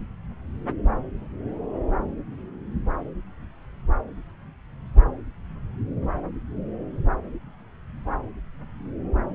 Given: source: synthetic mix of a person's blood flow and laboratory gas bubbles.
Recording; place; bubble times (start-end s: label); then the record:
Doppler ultrasound of blood flow; subclavian vein
no bubbles
From the record:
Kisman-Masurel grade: 000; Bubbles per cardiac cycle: 0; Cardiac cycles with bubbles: 0%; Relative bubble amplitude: no bubbles discernible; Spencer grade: 0 (complete lack of bubble signals)